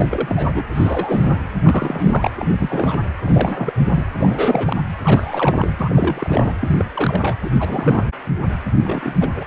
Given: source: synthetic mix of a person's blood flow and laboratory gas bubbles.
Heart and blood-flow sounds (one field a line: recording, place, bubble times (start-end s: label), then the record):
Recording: Doppler ultrasound of blood flow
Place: precordium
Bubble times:
0.00-0.07 s: bubbles
0.09-0.62 s: bubbles
0.74-1.41 s: bubbles
1.62-2.31 s: bubbles
2.37-2.56 s: bubbles
2.58-2.98 s: bubbles
3.23-3.73 s: bubbles
3.94-4.03 s: bubbles
4.21-4.81 s: bubbles
5.02-5.69 s: bubbles
5.77-6.54 s: bubbles
6.60-6.85 s: bubbles
6.94-7.35 s: bubbles
7.41-7.50 s: bubbles
7.59-8.04 s: bubbles
8.79-9.30 s: bubbles
9.34-9.43 s: bubbles
From the record:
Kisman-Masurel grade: 342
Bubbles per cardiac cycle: rolling drumbeat, 9 or more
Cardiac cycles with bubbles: 100%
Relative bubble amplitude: moderate (0.250 to 0.450)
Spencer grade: 3 (all of the cardiac periods contain showers or single bubble signals, but not dominating or overriding the cardiac motion signals)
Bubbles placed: anywhere in the cardiac cycle